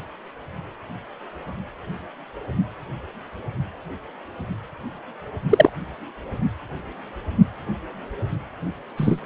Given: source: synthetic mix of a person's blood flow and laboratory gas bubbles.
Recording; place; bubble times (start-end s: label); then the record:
Doppler ultrasound of blood flow; precordium
5.49-5.70 s: bubbles
8.97-9.20 s: bubbles
From the record:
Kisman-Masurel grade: 123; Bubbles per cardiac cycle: 1 to 2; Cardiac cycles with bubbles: 10 to 50%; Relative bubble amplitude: loud (0.450 to 0.775); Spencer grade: 2 (many but less than half of the cardiac periods contain bubble signals, singularly or in groups); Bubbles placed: only in the low amplitude regions of the cardiac cycle